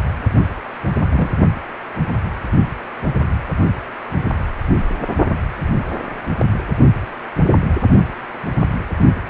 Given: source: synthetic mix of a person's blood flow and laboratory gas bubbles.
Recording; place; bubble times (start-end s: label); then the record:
Doppler ultrasound of blood flow; precordium
1.10-1.30 s: bubbles
From the record:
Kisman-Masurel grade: 113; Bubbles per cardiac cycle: 1 to 2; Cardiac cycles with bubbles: 1 to 10%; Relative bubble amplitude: loud (0.450 to 0.775); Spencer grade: 1 (occasional bubble signal discernible with the cardiac motion signal, with majority of cardiac periods free of bubbles); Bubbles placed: only in the low amplitude regions of the cardiac cycle